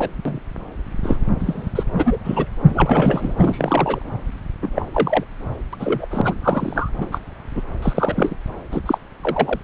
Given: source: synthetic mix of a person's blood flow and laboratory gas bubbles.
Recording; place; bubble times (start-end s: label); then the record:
Doppler ultrasound of blood flow; subclavian vein
0.00-0.09 s: bubbles
0.25-0.40 s: bubbles
1.03-1.19 s: bubbles
1.40-1.71 s: bubbles
1.75-1.83 s: bubbles
1.96-2.17 s: bubbles
2.23-2.45 s: bubbles
2.69-3.35 s: bubbles
3.38-4.02 s: bubbles
4.61-4.68 s: bubbles
4.75-4.86 s: bubbles
4.92-5.24 s: bubbles
5.72-6.06 s: bubbles
6.10-6.21 s: bubbles
6.24-6.35 s: bubbles
6.42-6.90 s: bubbles
6.99-7.09 s: bubbles
7.11-7.19 s: bubbles
7.54-7.61 s: bubbles
7.82-8.37 s: bubbles
8.71-8.80 s: bubbles
8.86-8.98 s: bubbles
9.21-9.59 s: bubbles
From the record:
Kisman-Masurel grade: 242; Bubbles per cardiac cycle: several, 3 to 8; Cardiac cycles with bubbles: 100%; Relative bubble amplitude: moderate (0.250 to 0.450); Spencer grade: 3 (all of the cardiac periods contain showers or single bubble signals, but not dominating or overriding the cardiac motion signals); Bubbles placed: anywhere in the cardiac cycle